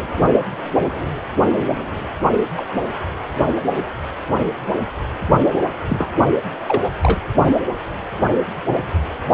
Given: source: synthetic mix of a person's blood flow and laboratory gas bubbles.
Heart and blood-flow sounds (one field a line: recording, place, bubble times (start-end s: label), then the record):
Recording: Doppler ultrasound of blood flow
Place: precordium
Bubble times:
2.56-2.65 s: bubbles
3.48-3.52 s: bubbles
5.89-6.09 s: bubbles
6.68-6.83 s: bubbles
7.03-7.26 s: bubbles
From the record:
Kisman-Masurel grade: 122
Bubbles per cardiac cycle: 1 to 2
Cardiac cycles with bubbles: 10 to 50%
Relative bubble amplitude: moderate (0.250 to 0.450)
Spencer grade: 2 (many but less than half of the cardiac periods contain bubble signals, singularly or in groups)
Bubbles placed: only in the low amplitude regions of the cardiac cycle